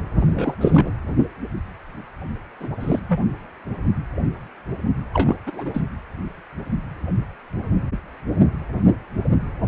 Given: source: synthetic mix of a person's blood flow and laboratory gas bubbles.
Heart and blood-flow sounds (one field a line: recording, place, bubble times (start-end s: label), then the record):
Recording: Doppler ultrasound of blood flow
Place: precordium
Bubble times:
0.20-0.54 s: bubbles
0.60-0.91 s: bubbles
2.60-2.67 s: bubbles
2.80-3.00 s: bubbles
3.08-3.19 s: bubbles
5.13-5.36 s: bubbles
5.46-5.81 s: bubbles
From the record:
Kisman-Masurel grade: 222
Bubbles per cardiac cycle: several, 3 to 8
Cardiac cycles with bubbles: 10 to 50%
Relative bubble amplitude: moderate (0.250 to 0.450)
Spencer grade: 2 (many but less than half of the cardiac periods contain bubble signals, singularly or in groups)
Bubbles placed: anywhere in the cardiac cycle